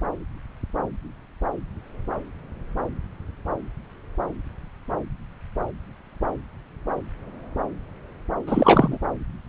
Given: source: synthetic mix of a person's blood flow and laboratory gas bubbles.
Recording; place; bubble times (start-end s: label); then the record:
Doppler ultrasound of blood flow; subclavian vein
8.46-8.98 s: bubbles
From the record:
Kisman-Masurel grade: 213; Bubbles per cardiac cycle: several, 3 to 8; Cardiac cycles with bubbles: 1 to 10%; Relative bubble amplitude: loud (0.450 to 0.775); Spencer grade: 1 (occasional bubble signal discernible with the cardiac motion signal, with majority of cardiac periods free of bubbles); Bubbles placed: anywhere in the cardiac cycle